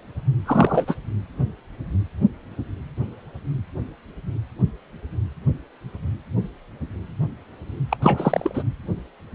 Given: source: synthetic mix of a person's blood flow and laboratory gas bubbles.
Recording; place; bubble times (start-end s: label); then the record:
Doppler ultrasound of blood flow; precordium
0.46-0.84 s: bubbles
0.87-0.95 s: bubbles
7.89-7.97 s: bubbles
8.02-8.63 s: bubbles
From the record:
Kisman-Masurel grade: 223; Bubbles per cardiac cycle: several, 3 to 8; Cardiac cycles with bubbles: 10 to 50%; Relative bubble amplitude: loud (0.450 to 0.775); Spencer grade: 2 (many but less than half of the cardiac periods contain bubble signals, singularly or in groups); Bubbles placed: anywhere in the cardiac cycle